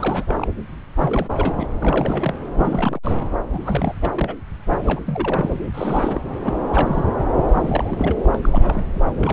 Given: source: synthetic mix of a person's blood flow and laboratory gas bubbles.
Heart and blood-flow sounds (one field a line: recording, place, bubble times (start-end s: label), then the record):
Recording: Doppler ultrasound of blood flow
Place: subclavian vein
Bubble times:
0.00-0.24 s: bubbles
0.27-0.47 s: bubbles
0.96-1.27 s: bubbles
1.35-1.69 s: bubbles
1.82-2.34 s: bubbles
2.56-2.98 s: bubbles
3.03-3.29 s: bubbles
3.52-3.95 s: bubbles
4.02-4.09 s: bubbles
4.15-4.35 s: bubbles
4.70-4.77 s: bubbles
4.85-5.00 s: bubbles
5.05-5.60 s: bubbles
5.73-6.20 s: bubbles
6.44-6.53 s: bubbles
6.72-7.04 s: bubbles
7.48-8.37 s: bubbles
8.42-9.00 s: bubbles
9.20-9.33 s: bubbles
From the record:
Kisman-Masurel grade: 342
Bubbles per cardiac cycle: rolling drumbeat, 9 or more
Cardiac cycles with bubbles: 100%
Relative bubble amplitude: moderate (0.250 to 0.450)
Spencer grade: 3 (all of the cardiac periods contain showers or single bubble signals, but not dominating or overriding the cardiac motion signals)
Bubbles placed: anywhere in the cardiac cycle